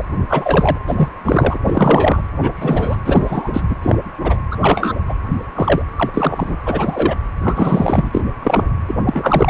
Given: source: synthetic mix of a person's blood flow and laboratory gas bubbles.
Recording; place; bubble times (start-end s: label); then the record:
Doppler ultrasound of blood flow; precordium
0.00-0.03 s: bubbles
0.28-0.77 s: bubbles
0.87-1.08 s: bubbles
1.23-1.57 s: bubbles
1.64-2.22 s: bubbles
2.41-2.52 s: bubbles
2.56-2.96 s: bubbles
3.05-3.61 s: bubbles
3.69-3.76 s: bubbles
3.82-3.98 s: bubbles
4.23-4.39 s: bubbles
4.51-4.56 s: bubbles
4.61-4.93 s: bubbles
5.09-5.13 s: bubbles
5.55-5.82 s: bubbles
5.96-6.10 s: bubbles
6.13-6.57 s: bubbles
6.65-7.15 s: bubbles
7.41-8.09 s: bubbles
8.12-8.22 s: bubbles
8.42-8.62 s: bubbles
8.88-8.95 s: bubbles
9.07-9.50 s: bubbles
From the record:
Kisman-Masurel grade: 243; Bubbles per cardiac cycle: several, 3 to 8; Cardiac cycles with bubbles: 100%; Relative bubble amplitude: loud (0.450 to 0.775); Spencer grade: 3 (all of the cardiac periods contain showers or single bubble signals, but not dominating or overriding the cardiac motion signals); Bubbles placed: anywhere in the cardiac cycle